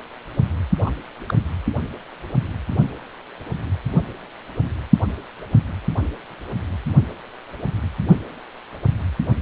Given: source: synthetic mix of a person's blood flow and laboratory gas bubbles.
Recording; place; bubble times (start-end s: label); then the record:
Doppler ultrasound of blood flow; precordium
0.81-0.92 s: bubbles
1.27-1.34 s: bubbles
From the record:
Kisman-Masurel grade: 112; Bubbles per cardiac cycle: 1 to 2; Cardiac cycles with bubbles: 1 to 10%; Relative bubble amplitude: moderate (0.250 to 0.450); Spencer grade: 1 (occasional bubble signal discernible with the cardiac motion signal, with majority of cardiac periods free of bubbles); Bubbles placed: only in the low amplitude regions of the cardiac cycle